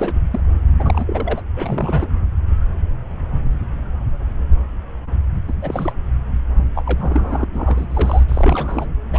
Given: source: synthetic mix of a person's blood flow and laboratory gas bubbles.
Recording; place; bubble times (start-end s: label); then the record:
Doppler ultrasound of blood flow; subclavian vein
0.00-0.19 s: bubbles
0.30-0.40 s: bubbles
0.79-1.42 s: bubbles
1.56-2.06 s: bubbles
5.47-5.53 s: bubbles
5.61-5.92 s: bubbles
6.75-6.83 s: bubbles
6.86-7.45 s: bubbles
7.53-7.87 s: bubbles
7.90-8.24 s: bubbles
8.28-8.86 s: bubbles
9.12-9.19 s: bubbles
From the record:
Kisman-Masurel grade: 332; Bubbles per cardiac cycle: rolling drumbeat, 9 or more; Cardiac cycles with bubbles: 50 to 99%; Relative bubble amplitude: moderate (0.250 to 0.450); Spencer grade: 3 (all of the cardiac periods contain showers or single bubble signals, but not dominating or overriding the cardiac motion signals); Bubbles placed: anywhere in the cardiac cycle